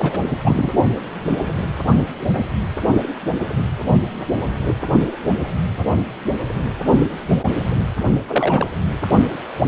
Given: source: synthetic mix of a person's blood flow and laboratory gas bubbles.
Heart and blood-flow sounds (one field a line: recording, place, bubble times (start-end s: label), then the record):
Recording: Doppler ultrasound of blood flow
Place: precordium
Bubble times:
0.00-0.37 s: bubbles
0.44-0.71 s: bubbles
8.27-8.72 s: bubbles
From the record:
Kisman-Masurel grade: 222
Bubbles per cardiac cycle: several, 3 to 8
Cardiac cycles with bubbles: 10 to 50%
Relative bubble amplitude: moderate (0.250 to 0.450)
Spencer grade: 2 (many but less than half of the cardiac periods contain bubble signals, singularly or in groups)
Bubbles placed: only in the low amplitude regions of the cardiac cycle